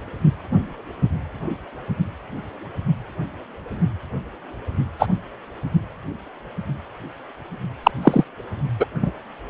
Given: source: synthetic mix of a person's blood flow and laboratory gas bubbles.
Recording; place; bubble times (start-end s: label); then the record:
Doppler ultrasound of blood flow; precordium
4.99-5.06 s: bubbles
7.83-7.91 s: bubbles
8.02-8.24 s: bubbles
8.79-8.86 s: bubbles
9.02-9.11 s: bubbles
From the record:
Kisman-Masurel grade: 123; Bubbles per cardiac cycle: 1 to 2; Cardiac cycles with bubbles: 10 to 50%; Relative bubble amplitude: loud (0.450 to 0.775); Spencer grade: 2 (many but less than half of the cardiac periods contain bubble signals, singularly or in groups); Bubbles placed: only in the low amplitude regions of the cardiac cycle